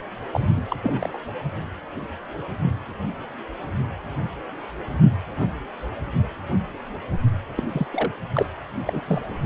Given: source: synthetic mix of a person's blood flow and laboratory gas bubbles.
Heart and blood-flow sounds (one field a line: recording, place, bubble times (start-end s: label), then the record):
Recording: Doppler ultrasound of blood flow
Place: precordium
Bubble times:
0.33-0.51 s: bubbles
0.56-0.61 s: bubbles
0.69-0.76 s: bubbles
0.82-1.18 s: bubbles
7.56-7.64 s: bubbles
7.68-7.87 s: bubbles
7.93-8.12 s: bubbles
8.34-8.46 s: bubbles
8.85-9.02 s: bubbles
9.07-9.21 s: bubbles
From the record:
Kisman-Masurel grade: 222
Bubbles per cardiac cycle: several, 3 to 8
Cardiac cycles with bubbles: 10 to 50%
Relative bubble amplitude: moderate (0.250 to 0.450)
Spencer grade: 2 (many but less than half of the cardiac periods contain bubble signals, singularly or in groups)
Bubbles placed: anywhere in the cardiac cycle